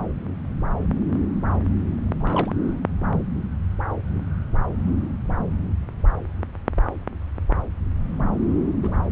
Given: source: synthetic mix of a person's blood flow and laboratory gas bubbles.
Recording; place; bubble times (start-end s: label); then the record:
Doppler ultrasound of blood flow; subclavian vein
2.14-2.51 s: bubbles
8.83-8.95 s: bubbles
From the record:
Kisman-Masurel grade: 121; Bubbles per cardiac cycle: 1 to 2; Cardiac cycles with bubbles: 10 to 50%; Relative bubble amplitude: barely perceptible (0.100 to 0.250); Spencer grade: 2 (many but less than half of the cardiac periods contain bubble signals, singularly or in groups); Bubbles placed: anywhere in the cardiac cycle